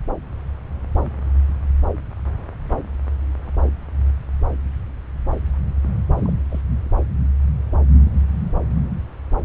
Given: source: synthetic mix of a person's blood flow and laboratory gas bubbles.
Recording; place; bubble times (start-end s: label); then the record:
Doppler ultrasound of blood flow; subclavian vein
6.16-6.33 s: bubbles
6.50-6.61 s: bubbles
From the record:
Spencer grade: 1 (occasional bubble signal discernible with the cardiac motion signal, with majority of cardiac periods free of bubbles); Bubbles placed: anywhere in the cardiac cycle